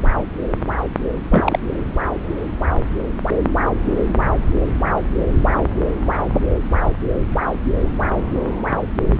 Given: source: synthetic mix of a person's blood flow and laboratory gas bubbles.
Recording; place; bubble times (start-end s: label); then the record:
Doppler ultrasound of blood flow; subclavian vein
1.31-1.59 s: bubbles
From the record:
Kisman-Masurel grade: 113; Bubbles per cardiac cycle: 1 to 2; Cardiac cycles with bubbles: 1 to 10%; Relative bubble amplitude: loud (0.450 to 0.775); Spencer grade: 1 (occasional bubble signal discernible with the cardiac motion signal, with majority of cardiac periods free of bubbles); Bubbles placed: anywhere in the cardiac cycle